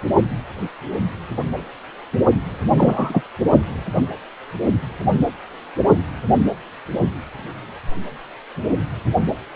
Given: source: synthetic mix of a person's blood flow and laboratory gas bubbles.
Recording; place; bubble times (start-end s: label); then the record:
Doppler ultrasound of blood flow; precordium
2.77-3.22 s: bubbles
From the record:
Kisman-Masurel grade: 113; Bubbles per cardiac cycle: 1 to 2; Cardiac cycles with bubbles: 1 to 10%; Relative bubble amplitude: loud (0.450 to 0.775); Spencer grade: 1 (occasional bubble signal discernible with the cardiac motion signal, with majority of cardiac periods free of bubbles); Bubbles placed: anywhere in the cardiac cycle